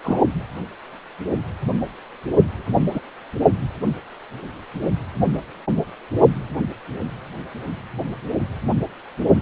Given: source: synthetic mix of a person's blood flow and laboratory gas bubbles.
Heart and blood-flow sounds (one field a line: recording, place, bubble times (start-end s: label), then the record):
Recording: Doppler ultrasound of blood flow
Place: precordium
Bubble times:
0.04-0.20 s: bubbles
2.91-3.01 s: bubbles
From the record:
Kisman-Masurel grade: 122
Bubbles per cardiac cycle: 1 to 2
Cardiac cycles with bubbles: 10 to 50%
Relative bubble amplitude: moderate (0.250 to 0.450)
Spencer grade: 2 (many but less than half of the cardiac periods contain bubble signals, singularly or in groups)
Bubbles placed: only in the low amplitude regions of the cardiac cycle